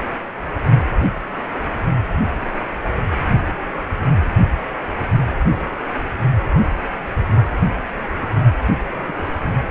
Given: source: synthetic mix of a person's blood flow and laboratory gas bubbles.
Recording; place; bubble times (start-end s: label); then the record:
Doppler ultrasound of blood flow; precordium
8.79-8.82 s: bubbles
8.93-9.32 s: bubbles
From the record:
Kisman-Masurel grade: 211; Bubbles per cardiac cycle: several, 3 to 8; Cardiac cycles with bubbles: 1 to 10%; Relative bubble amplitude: barely perceptible (0.100 to 0.250); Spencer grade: 1 (occasional bubble signal discernible with the cardiac motion signal, with majority of cardiac periods free of bubbles); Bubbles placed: only in the low amplitude regions of the cardiac cycle